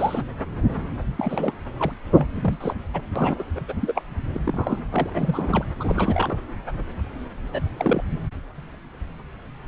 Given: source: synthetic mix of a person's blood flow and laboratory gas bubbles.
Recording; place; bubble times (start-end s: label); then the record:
Doppler ultrasound of blood flow; subclavian vein
0.00-0.24 s: bubbles
1.18-1.55 s: bubbles
1.78-1.93 s: bubbles
2.14-2.28 s: bubbles
2.35-2.75 s: bubbles
2.93-3.01 s: bubbles
3.16-3.44 s: bubbles
3.55-3.60 s: bubbles
3.68-3.74 s: bubbles
3.81-4.02 s: bubbles
4.33-4.40 s: bubbles
4.44-4.81 s: bubbles
4.92-5.10 s: bubbles
5.13-5.64 s: bubbles
5.79-6.38 s: bubbles
7.52-7.60 s: bubbles
7.67-8.02 s: bubbles
From the record:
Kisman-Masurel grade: 232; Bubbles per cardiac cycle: several, 3 to 8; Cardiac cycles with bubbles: 50 to 99%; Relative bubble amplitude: moderate (0.250 to 0.450); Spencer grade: 3 (all of the cardiac periods contain showers or single bubble signals, but not dominating or overriding the cardiac motion signals); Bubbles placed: anywhere in the cardiac cycle